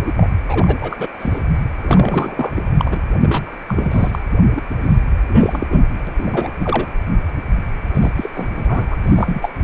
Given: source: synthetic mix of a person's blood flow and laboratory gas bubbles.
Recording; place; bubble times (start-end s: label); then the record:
Doppler ultrasound of blood flow; precordium
0.03-0.13 s: bubbles
0.16-0.29 s: bubbles
0.46-0.78 s: bubbles
0.80-1.08 s: bubbles
1.19-1.42 s: bubbles
1.81-2.61 s: bubbles
2.77-3.01 s: bubbles
3.21-3.52 s: bubbles
3.67-4.23 s: bubbles
4.54-4.62 s: bubbles
4.82-5.01 s: bubbles
5.29-5.67 s: bubbles
5.70-5.88 s: bubbles
6.07-6.52 s: bubbles
6.58-6.88 s: bubbles
7.94-8.10 s: bubbles
8.15-8.29 s: bubbles
8.34-8.48 s: bubbles
8.54-8.85 s: bubbles
8.90-8.96 s: bubbles
9.04-9.50 s: bubbles
From the record:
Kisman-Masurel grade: 342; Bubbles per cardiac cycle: rolling drumbeat, 9 or more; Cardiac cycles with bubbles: 100%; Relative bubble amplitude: moderate (0.250 to 0.450); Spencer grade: 3 (all of the cardiac periods contain showers or single bubble signals, but not dominating or overriding the cardiac motion signals); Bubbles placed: anywhere in the cardiac cycle